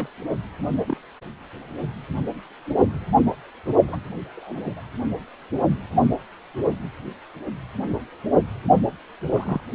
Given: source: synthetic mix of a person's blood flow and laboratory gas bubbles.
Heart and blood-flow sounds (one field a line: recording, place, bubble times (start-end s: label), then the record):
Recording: Doppler ultrasound of blood flow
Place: precordium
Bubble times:
0.00-0.08 s: bubbles
0.88-0.97 s: bubbles
3.87-3.97 s: bubbles
4.36-4.81 s: bubbles
9.32-9.60 s: bubbles
From the record:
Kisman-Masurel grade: 121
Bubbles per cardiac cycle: 1 to 2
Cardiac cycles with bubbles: 10 to 50%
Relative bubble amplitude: barely perceptible (0.100 to 0.250)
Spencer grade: 2 (many but less than half of the cardiac periods contain bubble signals, singularly or in groups)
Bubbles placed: only in the low amplitude regions of the cardiac cycle